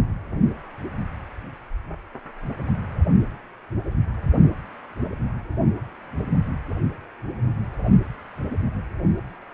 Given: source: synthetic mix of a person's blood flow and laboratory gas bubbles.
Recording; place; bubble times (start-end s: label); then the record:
Doppler ultrasound of blood flow; precordium
no bubbles
From the record:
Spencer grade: 0 (complete lack of bubble signals)